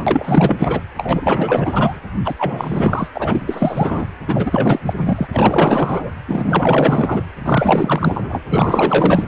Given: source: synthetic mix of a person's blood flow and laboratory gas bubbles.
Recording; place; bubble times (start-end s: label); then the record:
Doppler ultrasound of blood flow; precordium
0.00-0.81 s: bubbles
0.96-2.00 s: bubbles
2.24-2.35 s: bubbles
2.38-3.10 s: bubbles
3.16-4.08 s: bubbles
4.27-4.80 s: bubbles
4.86-4.94 s: bubbles
4.96-5.27 s: bubbles
5.33-6.11 s: bubbles
6.28-7.24 s: bubbles
7.39-8.42 s: bubbles
8.50-9.24 s: bubbles
From the record:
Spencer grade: 4 (maximum detectable bubble signal sounding continuously throughout systole and diastole of every cardiac period, and overriding the amplitude of the normal cardiac signals); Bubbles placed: anywhere in the cardiac cycle